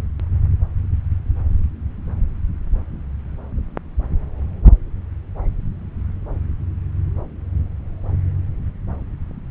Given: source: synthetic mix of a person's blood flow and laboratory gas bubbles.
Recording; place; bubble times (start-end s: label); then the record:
Doppler ultrasound of blood flow; subclavian vein
no bubbles
From the record:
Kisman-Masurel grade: 000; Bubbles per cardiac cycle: 0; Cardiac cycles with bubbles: 0%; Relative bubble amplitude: no bubbles discernible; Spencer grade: 0 (complete lack of bubble signals)